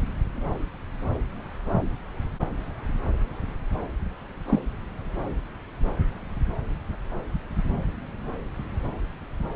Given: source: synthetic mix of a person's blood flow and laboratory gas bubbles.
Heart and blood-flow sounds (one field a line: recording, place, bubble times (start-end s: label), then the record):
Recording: Doppler ultrasound of blood flow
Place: subclavian vein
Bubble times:
4.47-4.60 s: bubbles
From the record:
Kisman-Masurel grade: 112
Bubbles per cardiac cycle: 1 to 2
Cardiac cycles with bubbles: 1 to 10%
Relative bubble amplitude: moderate (0.250 to 0.450)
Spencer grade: 1 (occasional bubble signal discernible with the cardiac motion signal, with majority of cardiac periods free of bubbles)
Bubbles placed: anywhere in the cardiac cycle